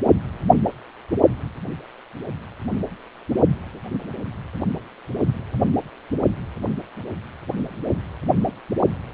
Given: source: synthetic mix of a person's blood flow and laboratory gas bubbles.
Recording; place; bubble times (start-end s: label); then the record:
Doppler ultrasound of blood flow; precordium
no bubbles
From the record:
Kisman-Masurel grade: 000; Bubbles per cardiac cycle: 0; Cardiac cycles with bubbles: 0%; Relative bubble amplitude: no bubbles discernible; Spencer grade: 0 (complete lack of bubble signals)